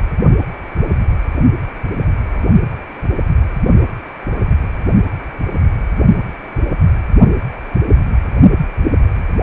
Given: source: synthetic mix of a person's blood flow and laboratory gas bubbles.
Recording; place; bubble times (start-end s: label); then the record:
Doppler ultrasound of blood flow; precordium
0.42-0.47 s: bubbles
2.08-2.45 s: bubbles
From the record:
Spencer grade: 2 (many but less than half of the cardiac periods contain bubble signals, singularly or in groups); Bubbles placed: only in the low amplitude regions of the cardiac cycle